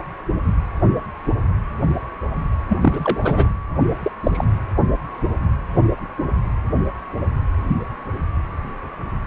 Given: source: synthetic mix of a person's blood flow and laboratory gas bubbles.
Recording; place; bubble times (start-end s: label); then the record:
Doppler ultrasound of blood flow; precordium
2.69-2.79 s: bubbles
2.81-3.47 s: bubbles
4.02-4.11 s: bubbles
4.23-4.44 s: bubbles
From the record:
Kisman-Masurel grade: 222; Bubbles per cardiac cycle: several, 3 to 8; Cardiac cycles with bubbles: 10 to 50%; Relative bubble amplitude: moderate (0.250 to 0.450); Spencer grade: 2 (many but less than half of the cardiac periods contain bubble signals, singularly or in groups); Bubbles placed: anywhere in the cardiac cycle